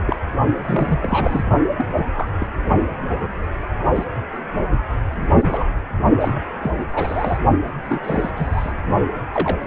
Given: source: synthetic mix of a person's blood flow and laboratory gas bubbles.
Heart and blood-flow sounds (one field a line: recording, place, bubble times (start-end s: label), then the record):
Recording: Doppler ultrasound of blood flow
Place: precordium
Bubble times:
0.07-0.16 s: bubbles
0.61-1.43 s: bubbles
1.78-1.86 s: bubbles
1.97-2.04 s: bubbles
2.14-2.29 s: bubbles
2.38-2.47 s: bubbles
3.08-3.34 s: bubbles
3.83-3.88 s: bubbles
3.95-4.05 s: bubbles
5.21-5.28 s: bubbles
5.38-5.64 s: bubbles
6.20-6.38 s: bubbles
6.61-7.38 s: bubbles
7.89-8.01 s: bubbles
8.04-8.31 s: bubbles
8.36-8.73 s: bubbles
9.33-9.67 s: bubbles
From the record:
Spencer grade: 3 (all of the cardiac periods contain showers or single bubble signals, but not dominating or overriding the cardiac motion signals)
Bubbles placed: only in the low amplitude regions of the cardiac cycle